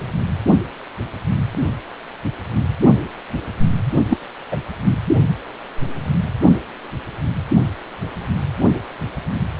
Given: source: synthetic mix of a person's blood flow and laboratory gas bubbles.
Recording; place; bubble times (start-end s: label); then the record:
Doppler ultrasound of blood flow; precordium
4.09-4.17 s: bubbles
4.51-4.57 s: bubbles
From the record:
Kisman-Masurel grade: 113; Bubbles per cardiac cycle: 1 to 2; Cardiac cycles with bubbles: 1 to 10%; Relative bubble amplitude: loud (0.450 to 0.775); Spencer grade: 1 (occasional bubble signal discernible with the cardiac motion signal, with majority of cardiac periods free of bubbles); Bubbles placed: anywhere in the cardiac cycle